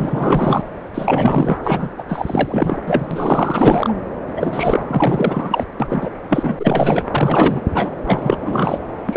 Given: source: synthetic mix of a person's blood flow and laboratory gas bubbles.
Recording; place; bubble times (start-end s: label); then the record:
Doppler ultrasound of blood flow; subclavian vein
0.00-0.65 s: bubbles
0.94-1.60 s: bubbles
1.64-1.89 s: bubbles
1.98-2.03 s: bubbles
2.08-2.81 s: bubbles
2.86-3.06 s: bubbles
3.11-3.94 s: bubbles
4.36-4.83 s: bubbles
4.87-5.67 s: bubbles
5.80-6.11 s: bubbles
6.29-7.04 s: bubbles
7.11-7.61 s: bubbles
7.73-7.92 s: bubbles
8.07-8.78 s: bubbles
9.06-9.17 s: bubbles
From the record:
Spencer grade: 4 (maximum detectable bubble signal sounding continuously throughout systole and diastole of every cardiac period, and overriding the amplitude of the normal cardiac signals); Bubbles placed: anywhere in the cardiac cycle